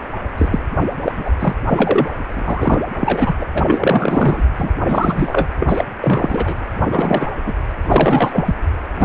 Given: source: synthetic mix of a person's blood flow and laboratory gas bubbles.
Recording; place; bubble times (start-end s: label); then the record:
Doppler ultrasound of blood flow; precordium
0.38-0.59 s: bubbles
1.05-1.12 s: bubbles
1.16-1.31 s: bubbles
1.40-1.55 s: bubbles
1.68-2.08 s: bubbles
2.29-2.79 s: bubbles
3.00-3.33 s: bubbles
3.38-3.45 s: bubbles
3.54-3.63 s: bubbles
3.66-4.50 s: bubbles
4.57-4.72 s: bubbles
4.87-5.47 s: bubbles
5.59-5.84 s: bubbles
6.02-6.55 s: bubbles
6.81-6.87 s: bubbles
6.92-7.27 s: bubbles
7.46-7.54 s: bubbles
7.82-8.54 s: bubbles
8.99-9.05 s: bubbles
From the record:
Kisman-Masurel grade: 343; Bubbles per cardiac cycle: rolling drumbeat, 9 or more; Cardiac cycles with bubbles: 100%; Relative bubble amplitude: loud (0.450 to 0.775); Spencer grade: 3 (all of the cardiac periods contain showers or single bubble signals, but not dominating or overriding the cardiac motion signals); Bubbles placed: anywhere in the cardiac cycle